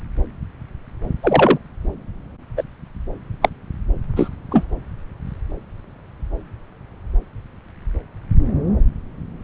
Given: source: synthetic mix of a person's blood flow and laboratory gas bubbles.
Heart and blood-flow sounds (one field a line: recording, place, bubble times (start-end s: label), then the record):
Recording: Doppler ultrasound of blood flow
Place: subclavian vein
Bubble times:
1.23-1.58 s: bubbles
2.56-2.63 s: bubbles
3.42-3.49 s: bubbles
4.16-4.29 s: bubbles
4.51-4.65 s: bubbles
From the record:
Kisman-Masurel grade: 123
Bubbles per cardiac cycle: 1 to 2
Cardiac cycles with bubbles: 10 to 50%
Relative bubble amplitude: loud (0.450 to 0.775)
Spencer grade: 2 (many but less than half of the cardiac periods contain bubble signals, singularly or in groups)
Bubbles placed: anywhere in the cardiac cycle